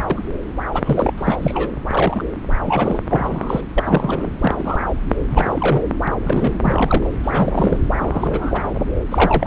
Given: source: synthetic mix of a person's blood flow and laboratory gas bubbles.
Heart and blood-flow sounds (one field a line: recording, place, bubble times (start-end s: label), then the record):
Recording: Doppler ultrasound of blood flow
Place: subclavian vein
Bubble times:
0.10-0.23 s: bubbles
0.72-1.12 s: bubbles
1.18-1.36 s: bubbles
1.41-1.71 s: bubbles
1.90-2.25 s: bubbles
2.65-2.99 s: bubbles
3.10-3.61 s: bubbles
3.74-4.31 s: bubbles
4.40-4.80 s: bubbles
5.30-5.81 s: bubbles
6.07-6.12 s: bubbles
6.20-6.54 s: bubbles
6.64-7.10 s: bubbles
7.24-7.78 s: bubbles
7.98-8.79 s: bubbles
9.09-9.47 s: bubbles
From the record:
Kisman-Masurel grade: 242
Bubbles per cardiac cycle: several, 3 to 8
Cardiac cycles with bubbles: 100%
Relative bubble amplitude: moderate (0.250 to 0.450)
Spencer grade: 3 (all of the cardiac periods contain showers or single bubble signals, but not dominating or overriding the cardiac motion signals)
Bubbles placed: anywhere in the cardiac cycle